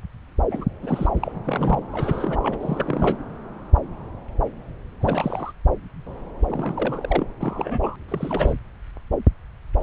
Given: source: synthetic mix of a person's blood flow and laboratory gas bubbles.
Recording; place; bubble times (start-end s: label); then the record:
Doppler ultrasound of blood flow; subclavian vein
0.51-0.66 s: bubbles
0.82-1.07 s: bubbles
1.16-1.32 s: bubbles
1.45-1.79 s: bubbles
1.92-2.39 s: bubbles
2.43-2.57 s: bubbles
2.60-3.17 s: bubbles
5.00-5.52 s: bubbles
6.47-7.28 s: bubbles
7.40-7.96 s: bubbles
8.09-8.53 s: bubbles
From the record:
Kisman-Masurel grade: 332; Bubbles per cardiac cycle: rolling drumbeat, 9 or more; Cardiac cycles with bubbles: 50 to 99%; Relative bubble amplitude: moderate (0.250 to 0.450); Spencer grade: 3 (all of the cardiac periods contain showers or single bubble signals, but not dominating or overriding the cardiac motion signals); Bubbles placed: anywhere in the cardiac cycle